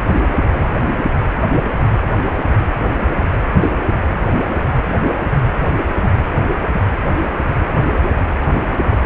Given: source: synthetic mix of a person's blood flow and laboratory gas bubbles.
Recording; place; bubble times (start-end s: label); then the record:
Doppler ultrasound of blood flow; precordium
3.61-3.74 s: bubbles
From the record:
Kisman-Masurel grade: 113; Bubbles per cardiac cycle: 1 to 2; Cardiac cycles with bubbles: 1 to 10%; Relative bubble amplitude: loud (0.450 to 0.775); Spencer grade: 1 (occasional bubble signal discernible with the cardiac motion signal, with majority of cardiac periods free of bubbles); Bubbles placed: anywhere in the cardiac cycle